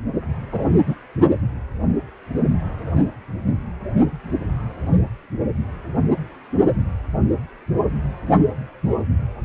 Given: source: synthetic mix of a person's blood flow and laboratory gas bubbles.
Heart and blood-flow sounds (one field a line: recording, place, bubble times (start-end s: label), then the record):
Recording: Doppler ultrasound of blood flow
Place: precordium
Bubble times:
0.52-0.65 s: bubbles
0.86-0.96 s: bubbles
From the record:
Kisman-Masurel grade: 113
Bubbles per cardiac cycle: 1 to 2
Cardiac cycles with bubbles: 1 to 10%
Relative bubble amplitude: loud (0.450 to 0.775)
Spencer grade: 1 (occasional bubble signal discernible with the cardiac motion signal, with majority of cardiac periods free of bubbles)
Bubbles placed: only in the low amplitude regions of the cardiac cycle